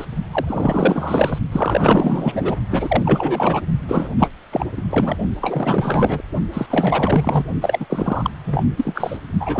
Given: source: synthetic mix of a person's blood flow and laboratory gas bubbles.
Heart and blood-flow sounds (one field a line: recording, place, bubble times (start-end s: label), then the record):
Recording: Doppler ultrasound of blood flow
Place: precordium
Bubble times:
0.00-0.05 s: bubbles
0.32-1.38 s: bubbles
1.52-2.56 s: bubbles
2.71-3.60 s: bubbles
3.88-4.08 s: bubbles
4.18-4.30 s: bubbles
4.52-4.66 s: bubbles
4.76-4.82 s: bubbles
4.89-5.17 s: bubbles
5.41-6.22 s: bubbles
6.53-6.67 s: bubbles
6.70-7.45 s: bubbles
7.61-7.86 s: bubbles
7.90-8.30 s: bubbles
8.46-8.65 s: bubbles
8.77-9.17 s: bubbles
9.40-9.60 s: bubbles
From the record:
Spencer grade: 4 (maximum detectable bubble signal sounding continuously throughout systole and diastole of every cardiac period, and overriding the amplitude of the normal cardiac signals)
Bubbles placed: only in the low amplitude regions of the cardiac cycle